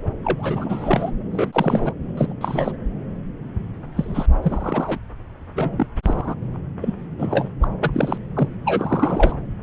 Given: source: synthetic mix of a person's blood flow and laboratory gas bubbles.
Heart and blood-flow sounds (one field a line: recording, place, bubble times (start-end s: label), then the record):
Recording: Doppler ultrasound of blood flow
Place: subclavian vein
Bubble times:
0.00-0.02 s: bubbles
0.23-1.11 s: bubbles
1.32-1.50 s: bubbles
1.53-1.93 s: bubbles
2.17-2.33 s: bubbles
2.40-2.71 s: bubbles
3.96-4.26 s: bubbles
4.42-4.98 s: bubbles
5.55-5.87 s: bubbles
6.03-6.36 s: bubbles
6.81-6.94 s: bubbles
7.19-7.50 s: bubbles
7.62-7.68 s: bubbles
7.81-8.18 s: bubbles
8.35-8.48 s: bubbles
8.65-9.37 s: bubbles
From the record:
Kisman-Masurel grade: 242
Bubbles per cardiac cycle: several, 3 to 8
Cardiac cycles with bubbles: 100%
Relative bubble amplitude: moderate (0.250 to 0.450)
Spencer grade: 3 (all of the cardiac periods contain showers or single bubble signals, but not dominating or overriding the cardiac motion signals)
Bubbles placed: anywhere in the cardiac cycle